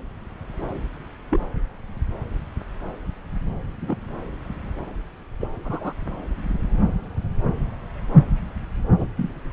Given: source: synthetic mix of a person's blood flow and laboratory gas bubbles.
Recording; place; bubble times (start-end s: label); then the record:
Doppler ultrasound of blood flow; subclavian vein
1.30-1.41 s: bubbles
3.81-3.97 s: bubbles
5.40-5.49 s: bubbles
5.65-5.93 s: bubbles
8.99-9.07 s: bubbles
9.17-9.29 s: bubbles
From the record:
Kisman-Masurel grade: 121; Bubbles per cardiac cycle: 1 to 2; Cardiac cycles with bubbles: 10 to 50%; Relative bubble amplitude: barely perceptible (0.100 to 0.250); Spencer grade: 2 (many but less than half of the cardiac periods contain bubble signals, singularly or in groups); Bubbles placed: anywhere in the cardiac cycle